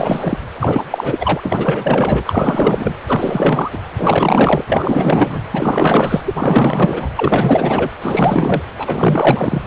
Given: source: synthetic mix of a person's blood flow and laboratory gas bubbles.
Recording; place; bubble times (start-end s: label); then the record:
Doppler ultrasound of blood flow; precordium
0.00-0.38 s: bubbles
0.60-0.84 s: bubbles
0.90-2.22 s: bubbles
2.26-2.95 s: bubbles
3.07-3.71 s: bubbles
3.74-3.79 s: bubbles
3.98-4.64 s: bubbles
4.67-5.41 s: bubbles
5.50-6.21 s: bubbles
6.25-6.34 s: bubbles
6.38-7.10 s: bubbles
7.15-7.90 s: bubbles
8.02-8.62 s: bubbles
8.78-9.62 s: bubbles
From the record:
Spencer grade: 4 (maximum detectable bubble signal sounding continuously throughout systole and diastole of every cardiac period, and overriding the amplitude of the normal cardiac signals); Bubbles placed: anywhere in the cardiac cycle